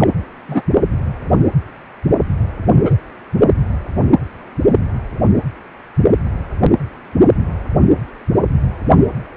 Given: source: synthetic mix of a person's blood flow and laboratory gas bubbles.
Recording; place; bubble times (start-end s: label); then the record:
Doppler ultrasound of blood flow; precordium
0.00-0.08 s: bubbles
0.47-0.62 s: bubbles
2.85-2.96 s: bubbles
From the record:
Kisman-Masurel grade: 123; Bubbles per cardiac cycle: 1 to 2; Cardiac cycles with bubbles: 10 to 50%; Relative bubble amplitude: loud (0.450 to 0.775); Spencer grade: 2 (many but less than half of the cardiac periods contain bubble signals, singularly or in groups); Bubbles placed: only in the low amplitude regions of the cardiac cycle